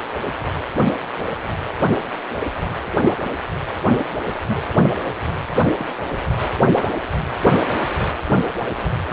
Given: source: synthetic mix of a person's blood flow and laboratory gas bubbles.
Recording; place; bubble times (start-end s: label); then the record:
Doppler ultrasound of blood flow; precordium
2.35-2.48 s: bubbles
3.98-4.07 s: bubbles
4.47-4.62 s: bubbles
5.75-5.90 s: bubbles
From the record:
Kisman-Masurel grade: 121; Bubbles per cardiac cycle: 1 to 2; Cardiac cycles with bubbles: 10 to 50%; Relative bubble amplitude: barely perceptible (0.100 to 0.250); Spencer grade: 2 (many but less than half of the cardiac periods contain bubble signals, singularly or in groups); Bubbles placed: anywhere in the cardiac cycle